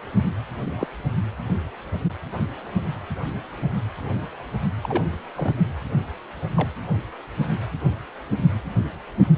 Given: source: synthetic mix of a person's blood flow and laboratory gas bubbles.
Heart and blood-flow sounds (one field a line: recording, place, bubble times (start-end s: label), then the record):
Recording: Doppler ultrasound of blood flow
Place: precordium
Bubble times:
0.65-0.70 s: bubbles
0.77-0.87 s: bubbles
4.82-5.04 s: bubbles
5.37-5.53 s: bubbles
6.55-6.69 s: bubbles
From the record:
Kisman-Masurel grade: 121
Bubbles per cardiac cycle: 1 to 2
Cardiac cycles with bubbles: 10 to 50%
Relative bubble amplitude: barely perceptible (0.100 to 0.250)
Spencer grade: 2 (many but less than half of the cardiac periods contain bubble signals, singularly or in groups)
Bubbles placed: anywhere in the cardiac cycle